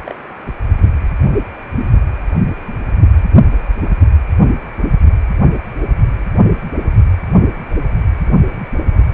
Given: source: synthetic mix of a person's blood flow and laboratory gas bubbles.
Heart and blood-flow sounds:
Doppler ultrasound of blood flow; precordium
0.04-0.15 s: bubbles
From the record:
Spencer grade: 1 (occasional bubble signal discernible with the cardiac motion signal, with majority of cardiac periods free of bubbles); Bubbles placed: anywhere in the cardiac cycle

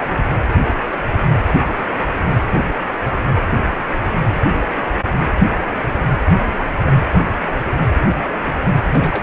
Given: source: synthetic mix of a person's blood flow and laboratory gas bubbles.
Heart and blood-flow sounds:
Doppler ultrasound of blood flow; precordium
8.93-9.23 s: bubbles
From the record:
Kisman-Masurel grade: 212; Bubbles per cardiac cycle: several, 3 to 8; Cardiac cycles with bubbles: 1 to 10%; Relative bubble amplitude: moderate (0.250 to 0.450); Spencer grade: 1 (occasional bubble signal discernible with the cardiac motion signal, with majority of cardiac periods free of bubbles); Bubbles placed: anywhere in the cardiac cycle

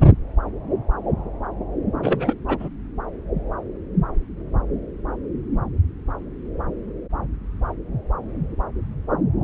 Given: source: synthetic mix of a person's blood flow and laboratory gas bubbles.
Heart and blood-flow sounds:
Doppler ultrasound of blood flow; subclavian vein
2.02-2.34 s: bubbles
2.48-2.57 s: bubbles
2.60-2.69 s: bubbles
From the record:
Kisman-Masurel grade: 212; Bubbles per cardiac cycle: several, 3 to 8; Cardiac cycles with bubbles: 1 to 10%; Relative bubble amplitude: moderate (0.250 to 0.450); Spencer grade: 1 (occasional bubble signal discernible with the cardiac motion signal, with majority of cardiac periods free of bubbles); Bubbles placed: anywhere in the cardiac cycle

